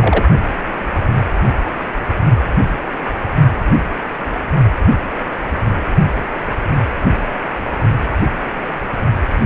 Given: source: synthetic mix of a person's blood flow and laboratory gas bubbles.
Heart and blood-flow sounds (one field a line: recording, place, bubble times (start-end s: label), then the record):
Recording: Doppler ultrasound of blood flow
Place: precordium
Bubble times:
0.00-0.24 s: bubbles
From the record:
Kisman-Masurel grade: 212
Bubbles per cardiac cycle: several, 3 to 8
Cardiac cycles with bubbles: 1 to 10%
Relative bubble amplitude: moderate (0.250 to 0.450)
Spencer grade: 1 (occasional bubble signal discernible with the cardiac motion signal, with majority of cardiac periods free of bubbles)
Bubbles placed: only in the low amplitude regions of the cardiac cycle